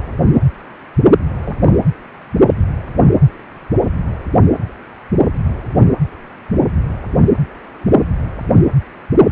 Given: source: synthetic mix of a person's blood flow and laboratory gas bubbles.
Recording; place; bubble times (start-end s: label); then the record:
Doppler ultrasound of blood flow; precordium
1.45-1.77 s: bubbles
From the record:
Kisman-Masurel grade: 211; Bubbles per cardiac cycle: several, 3 to 8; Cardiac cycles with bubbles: 1 to 10%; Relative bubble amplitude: barely perceptible (0.100 to 0.250); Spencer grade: 1 (occasional bubble signal discernible with the cardiac motion signal, with majority of cardiac periods free of bubbles); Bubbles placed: anywhere in the cardiac cycle